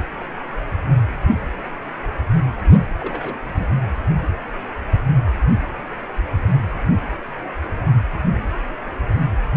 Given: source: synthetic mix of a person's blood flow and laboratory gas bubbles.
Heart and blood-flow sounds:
Doppler ultrasound of blood flow; precordium
3.00-3.35 s: bubbles
3.56-3.68 s: bubbles
From the record:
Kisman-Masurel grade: 121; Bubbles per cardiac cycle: 1 to 2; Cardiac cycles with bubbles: 10 to 50%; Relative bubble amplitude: barely perceptible (0.100 to 0.250); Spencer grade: 2 (many but less than half of the cardiac periods contain bubble signals, singularly or in groups); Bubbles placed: anywhere in the cardiac cycle

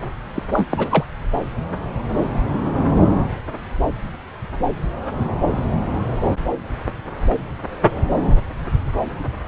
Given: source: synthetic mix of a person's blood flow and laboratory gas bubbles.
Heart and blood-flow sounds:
Doppler ultrasound of blood flow; subclavian vein
0.35-0.43 s: bubbles
0.53-0.66 s: bubbles
0.70-1.06 s: bubbles
From the record:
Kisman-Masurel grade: 212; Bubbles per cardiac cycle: several, 3 to 8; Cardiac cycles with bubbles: 1 to 10%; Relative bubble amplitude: moderate (0.250 to 0.450); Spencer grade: 1 (occasional bubble signal discernible with the cardiac motion signal, with majority of cardiac periods free of bubbles); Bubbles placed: anywhere in the cardiac cycle

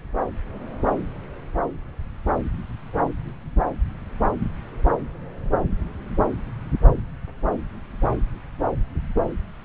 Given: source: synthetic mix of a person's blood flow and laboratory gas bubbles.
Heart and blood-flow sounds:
Doppler ultrasound of blood flow; subclavian vein
no bubbles
From the record:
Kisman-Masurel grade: 000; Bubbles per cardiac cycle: 0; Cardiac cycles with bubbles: 0%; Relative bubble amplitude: no bubbles discernible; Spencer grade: 0 (complete lack of bubble signals)

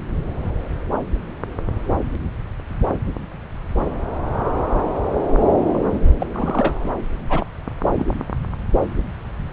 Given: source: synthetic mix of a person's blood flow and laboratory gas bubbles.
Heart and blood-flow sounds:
Doppler ultrasound of blood flow; subclavian vein
5.74-5.79 s: bubbles
5.89-6.00 s: bubbles
6.19-6.27 s: bubbles
6.31-6.76 s: bubbles
6.83-6.88 s: bubbles
7.29-7.46 s: bubbles
7.95-8.06 s: bubbles
From the record:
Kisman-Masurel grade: 222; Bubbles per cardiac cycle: several, 3 to 8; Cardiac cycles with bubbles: 10 to 50%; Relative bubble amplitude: moderate (0.250 to 0.450); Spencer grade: 2 (many but less than half of the cardiac periods contain bubble signals, singularly or in groups); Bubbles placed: anywhere in the cardiac cycle

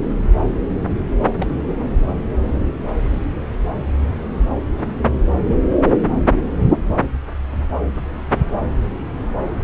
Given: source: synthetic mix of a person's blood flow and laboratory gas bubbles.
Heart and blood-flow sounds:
Doppler ultrasound of blood flow; subclavian vein
1.38-1.54 s: bubbles
From the record:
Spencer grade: 1 (occasional bubble signal discernible with the cardiac motion signal, with majority of cardiac periods free of bubbles); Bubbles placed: anywhere in the cardiac cycle

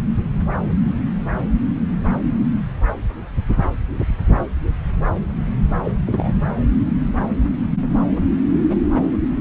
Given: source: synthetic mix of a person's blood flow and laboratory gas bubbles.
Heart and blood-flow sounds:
Doppler ultrasound of blood flow; subclavian vein
5.84-5.92 s: bubbles
6.07-6.38 s: bubbles
From the record:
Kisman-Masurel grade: 212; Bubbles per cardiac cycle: several, 3 to 8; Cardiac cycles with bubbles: 1 to 10%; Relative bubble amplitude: moderate (0.250 to 0.450); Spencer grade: 1 (occasional bubble signal discernible with the cardiac motion signal, with majority of cardiac periods free of bubbles); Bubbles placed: anywhere in the cardiac cycle

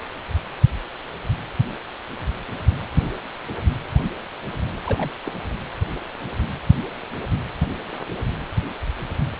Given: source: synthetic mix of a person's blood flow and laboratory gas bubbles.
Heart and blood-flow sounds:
Doppler ultrasound of blood flow; precordium
4.84-5.11 s: bubbles
5.25-5.33 s: bubbles
From the record:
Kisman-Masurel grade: 221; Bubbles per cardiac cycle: several, 3 to 8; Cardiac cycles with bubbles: 10 to 50%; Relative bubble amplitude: barely perceptible (0.100 to 0.250); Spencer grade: 2 (many but less than half of the cardiac periods contain bubble signals, singularly or in groups); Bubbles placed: anywhere in the cardiac cycle

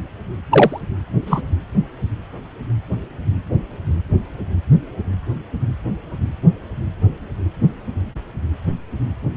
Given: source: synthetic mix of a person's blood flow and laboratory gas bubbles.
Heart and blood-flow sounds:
Doppler ultrasound of blood flow; precordium
0.51-0.81 s: bubbles
1.26-1.41 s: bubbles
From the record:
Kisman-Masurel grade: 113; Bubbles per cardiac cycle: 1 to 2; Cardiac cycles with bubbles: 1 to 10%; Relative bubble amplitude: loud (0.450 to 0.775); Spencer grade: 1 (occasional bubble signal discernible with the cardiac motion signal, with majority of cardiac periods free of bubbles); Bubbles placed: anywhere in the cardiac cycle

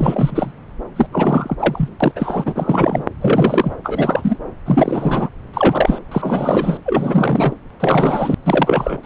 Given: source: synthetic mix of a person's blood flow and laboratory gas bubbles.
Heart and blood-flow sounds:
Doppler ultrasound of blood flow; subclavian vein
0.00-0.51 s: bubbles
0.96-1.06 s: bubbles
1.12-1.56 s: bubbles
1.59-1.89 s: bubbles
2.00-2.12 s: bubbles
2.16-3.04 s: bubbles
3.21-3.73 s: bubbles
3.84-4.38 s: bubbles
4.66-5.29 s: bubbles
5.53-5.99 s: bubbles
6.11-6.77 s: bubbles
6.85-7.57 s: bubbles
7.79-8.35 s: bubbles
8.45-8.98 s: bubbles
9.03-9.06 s: bubbles
From the record:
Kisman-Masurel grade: 333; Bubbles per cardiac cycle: rolling drumbeat, 9 or more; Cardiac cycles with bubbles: 50 to 99%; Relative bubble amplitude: loud (0.450 to 0.775); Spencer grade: 3 (all of the cardiac periods contain showers or single bubble signals, but not dominating or overriding the cardiac motion signals); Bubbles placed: anywhere in the cardiac cycle

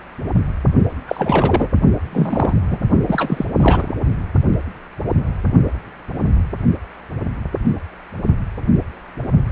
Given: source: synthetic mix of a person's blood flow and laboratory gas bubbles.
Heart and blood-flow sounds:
Doppler ultrasound of blood flow; precordium
1.07-1.68 s: bubbles
2.12-2.54 s: bubbles
2.69-2.79 s: bubbles
3.06-3.45 s: bubbles
3.59-3.93 s: bubbles
From the record:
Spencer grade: 2 (many but less than half of the cardiac periods contain bubble signals, singularly or in groups); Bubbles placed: only in the low amplitude regions of the cardiac cycle

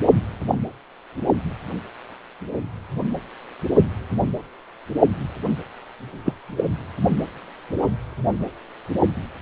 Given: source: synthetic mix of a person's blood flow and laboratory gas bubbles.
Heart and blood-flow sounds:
Doppler ultrasound of blood flow; precordium
6.25-6.33 s: bubbles
6.57-6.65 s: bubbles
From the record:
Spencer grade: 1 (occasional bubble signal discernible with the cardiac motion signal, with majority of cardiac periods free of bubbles); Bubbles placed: anywhere in the cardiac cycle

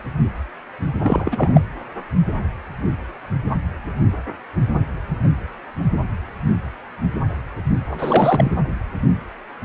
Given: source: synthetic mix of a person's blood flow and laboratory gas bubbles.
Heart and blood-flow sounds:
Doppler ultrasound of blood flow; precordium
1.03-1.61 s: bubbles
7.90-8.52 s: bubbles
From the record:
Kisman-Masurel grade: 213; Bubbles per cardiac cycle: several, 3 to 8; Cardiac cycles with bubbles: 1 to 10%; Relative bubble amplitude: loud (0.450 to 0.775); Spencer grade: 1 (occasional bubble signal discernible with the cardiac motion signal, with majority of cardiac periods free of bubbles); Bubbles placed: anywhere in the cardiac cycle

